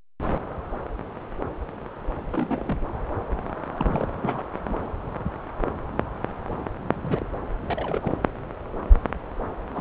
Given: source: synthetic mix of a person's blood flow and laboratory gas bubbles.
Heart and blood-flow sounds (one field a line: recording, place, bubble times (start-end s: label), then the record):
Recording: Doppler ultrasound of blood flow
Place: subclavian vein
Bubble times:
2.31-2.81 s: bubbles
3.77-4.07 s: bubbles
4.21-4.43 s: bubbles
4.58-4.75 s: bubbles
6.88-7.28 s: bubbles
7.61-8.13 s: bubbles
9.73-9.81 s: bubbles
From the record:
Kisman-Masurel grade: 221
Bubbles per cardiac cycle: several, 3 to 8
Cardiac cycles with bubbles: 10 to 50%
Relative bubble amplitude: barely perceptible (0.100 to 0.250)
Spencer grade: 2 (many but less than half of the cardiac periods contain bubble signals, singularly or in groups)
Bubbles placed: anywhere in the cardiac cycle